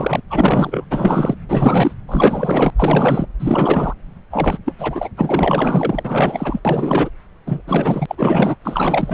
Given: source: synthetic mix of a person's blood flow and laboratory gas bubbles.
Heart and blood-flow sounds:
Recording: Doppler ultrasound of blood flow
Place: subclavian vein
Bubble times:
0.00-0.21 s: bubbles
0.30-0.84 s: bubbles
0.90-1.35 s: bubbles
1.49-1.93 s: bubbles
2.08-2.71 s: bubbles
2.76-3.26 s: bubbles
3.39-3.94 s: bubbles
4.30-4.58 s: bubbles
4.65-4.74 s: bubbles
4.79-5.09 s: bubbles
5.17-6.60 s: bubbles
6.64-7.09 s: bubbles
7.46-7.62 s: bubbles
7.67-8.56 s: bubbles
8.64-9.14 s: bubbles
From the record:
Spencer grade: 4 (maximum detectable bubble signal sounding continuously throughout systole and diastole of every cardiac period, and overriding the amplitude of the normal cardiac signals)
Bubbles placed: anywhere in the cardiac cycle

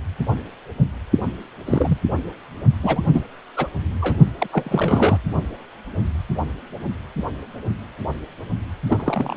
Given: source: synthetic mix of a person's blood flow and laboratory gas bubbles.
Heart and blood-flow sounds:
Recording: Doppler ultrasound of blood flow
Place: precordium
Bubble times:
1.66-1.97 s: bubbles
2.82-3.01 s: bubbles
3.13-3.26 s: bubbles
3.56-3.67 s: bubbles
4.01-4.17 s: bubbles
4.38-4.47 s: bubbles
4.52-5.17 s: bubbles
8.90-9.37 s: bubbles
From the record:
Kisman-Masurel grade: 222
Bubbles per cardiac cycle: several, 3 to 8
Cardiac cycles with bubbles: 10 to 50%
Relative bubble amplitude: moderate (0.250 to 0.450)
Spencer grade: 2 (many but less than half of the cardiac periods contain bubble signals, singularly or in groups)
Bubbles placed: only in the low amplitude regions of the cardiac cycle

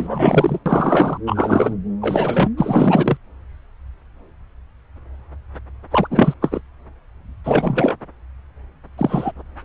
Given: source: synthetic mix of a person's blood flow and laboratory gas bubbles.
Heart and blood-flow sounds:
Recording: Doppler ultrasound of blood flow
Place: subclavian vein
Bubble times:
0.00-0.59 s: bubbles
0.66-1.18 s: bubbles
1.26-1.74 s: bubbles
2.01-2.50 s: bubbles
2.57-3.17 s: bubbles
5.90-6.07 s: bubbles
6.10-6.34 s: bubbles
6.41-6.60 s: bubbles
7.44-7.94 s: bubbles
8.97-9.32 s: bubbles
From the record:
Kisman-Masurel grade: 233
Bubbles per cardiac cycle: several, 3 to 8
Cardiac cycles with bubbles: 50 to 99%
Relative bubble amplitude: loud (0.450 to 0.775)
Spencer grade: 3 (all of the cardiac periods contain showers or single bubble signals, but not dominating or overriding the cardiac motion signals)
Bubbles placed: anywhere in the cardiac cycle

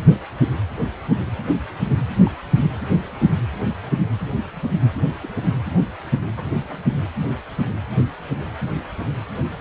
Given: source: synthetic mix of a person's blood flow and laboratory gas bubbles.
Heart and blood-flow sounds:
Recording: Doppler ultrasound of blood flow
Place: precordium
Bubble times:
2.26-2.31 s: bubbles
3.18-3.26 s: bubbles
5.22-5.29 s: bubbles
6.37-6.43 s: bubbles
6.69-6.77 s: bubbles
From the record:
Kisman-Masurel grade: 121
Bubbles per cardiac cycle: 1 to 2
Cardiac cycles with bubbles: 10 to 50%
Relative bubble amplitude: barely perceptible (0.100 to 0.250)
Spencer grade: 2 (many but less than half of the cardiac periods contain bubble signals, singularly or in groups)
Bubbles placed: anywhere in the cardiac cycle

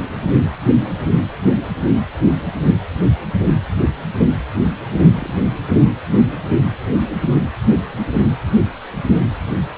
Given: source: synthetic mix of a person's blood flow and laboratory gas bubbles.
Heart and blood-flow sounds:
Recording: Doppler ultrasound of blood flow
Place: precordium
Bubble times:
5.08-5.33 s: bubbles
5.69-5.77 s: bubbles
From the record:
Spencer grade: 1 (occasional bubble signal discernible with the cardiac motion signal, with majority of cardiac periods free of bubbles)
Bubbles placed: anywhere in the cardiac cycle

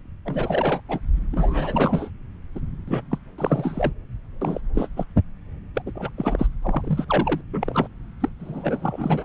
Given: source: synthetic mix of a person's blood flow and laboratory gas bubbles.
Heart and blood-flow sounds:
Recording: Doppler ultrasound of blood flow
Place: subclavian vein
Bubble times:
0.25-0.80 s: bubbles
0.89-1.00 s: bubbles
1.32-2.10 s: bubbles
2.55-2.59 s: bubbles
2.88-3.02 s: bubbles
3.11-3.18 s: bubbles
3.38-3.92 s: bubbles
4.41-4.61 s: bubbles
4.75-4.88 s: bubbles
4.96-5.04 s: bubbles
5.75-5.82 s: bubbles
5.86-5.92 s: bubbles
5.96-6.09 s: bubbles
6.17-6.47 s: bubbles
6.62-7.04 s: bubbles
7.09-7.41 s: bubbles
7.52-7.87 s: bubbles
8.21-8.29 s: bubbles
8.40-9.25 s: bubbles
From the record:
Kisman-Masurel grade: 332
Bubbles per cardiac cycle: rolling drumbeat, 9 or more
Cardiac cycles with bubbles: 50 to 99%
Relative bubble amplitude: moderate (0.250 to 0.450)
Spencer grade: 3 (all of the cardiac periods contain showers or single bubble signals, but not dominating or overriding the cardiac motion signals)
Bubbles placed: anywhere in the cardiac cycle

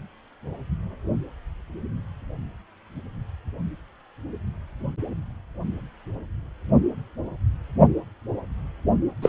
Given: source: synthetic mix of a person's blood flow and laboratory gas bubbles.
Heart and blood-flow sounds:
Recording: Doppler ultrasound of blood flow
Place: precordium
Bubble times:
9.21-9.29 s: bubbles
From the record:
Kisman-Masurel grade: 213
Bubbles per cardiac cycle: several, 3 to 8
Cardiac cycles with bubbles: 1 to 10%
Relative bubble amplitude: loud (0.450 to 0.775)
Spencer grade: 1 (occasional bubble signal discernible with the cardiac motion signal, with majority of cardiac periods free of bubbles)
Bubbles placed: only in the low amplitude regions of the cardiac cycle

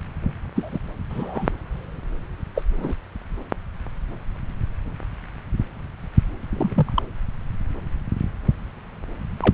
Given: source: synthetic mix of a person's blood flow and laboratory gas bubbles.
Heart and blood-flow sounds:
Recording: Doppler ultrasound of blood flow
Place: subclavian vein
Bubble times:
0.55-0.79 s: bubbles
1.10-1.49 s: bubbles
2.55-2.62 s: bubbles
2.78-2.94 s: bubbles
6.53-6.92 s: bubbles
6.96-7.03 s: bubbles
9.40-9.54 s: bubbles
From the record:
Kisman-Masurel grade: 122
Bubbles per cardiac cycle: 1 to 2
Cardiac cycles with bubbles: 10 to 50%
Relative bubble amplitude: moderate (0.250 to 0.450)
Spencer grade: 2 (many but less than half of the cardiac periods contain bubble signals, singularly or in groups)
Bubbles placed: anywhere in the cardiac cycle

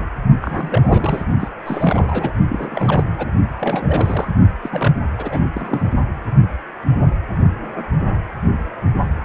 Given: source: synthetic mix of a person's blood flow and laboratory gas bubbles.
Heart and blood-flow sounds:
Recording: Doppler ultrasound of blood flow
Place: precordium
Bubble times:
0.42-1.23 s: bubbles
1.40-1.48 s: bubbles
1.66-2.37 s: bubbles
2.49-3.04 s: bubbles
3.17-3.27 s: bubbles
3.59-4.28 s: bubbles
4.62-4.94 s: bubbles
5.17-5.44 s: bubbles
5.53-5.86 s: bubbles
From the record:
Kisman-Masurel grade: 332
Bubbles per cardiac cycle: rolling drumbeat, 9 or more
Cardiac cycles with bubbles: 50 to 99%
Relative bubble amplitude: moderate (0.250 to 0.450)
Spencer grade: 3 (all of the cardiac periods contain showers or single bubble signals, but not dominating or overriding the cardiac motion signals)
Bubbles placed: only in the low amplitude regions of the cardiac cycle

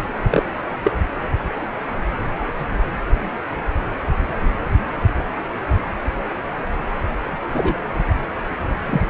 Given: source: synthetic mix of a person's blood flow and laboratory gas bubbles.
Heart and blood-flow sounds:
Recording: Doppler ultrasound of blood flow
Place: precordium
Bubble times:
0.29-0.43 s: bubbles
0.84-0.94 s: bubbles
7.53-7.79 s: bubbles
8.86-9.01 s: bubbles
From the record:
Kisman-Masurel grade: 122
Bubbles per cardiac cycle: 1 to 2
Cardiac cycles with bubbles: 10 to 50%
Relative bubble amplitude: moderate (0.250 to 0.450)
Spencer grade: 2 (many but less than half of the cardiac periods contain bubble signals, singularly or in groups)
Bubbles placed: only in the low amplitude regions of the cardiac cycle

